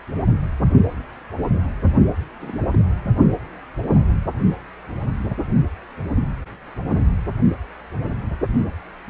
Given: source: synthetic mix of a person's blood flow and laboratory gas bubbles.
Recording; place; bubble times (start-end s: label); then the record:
Doppler ultrasound of blood flow; precordium
2.40-2.65 s: bubbles
2.73-2.77 s: bubbles
From the record:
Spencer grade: 1 (occasional bubble signal discernible with the cardiac motion signal, with majority of cardiac periods free of bubbles); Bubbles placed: anywhere in the cardiac cycle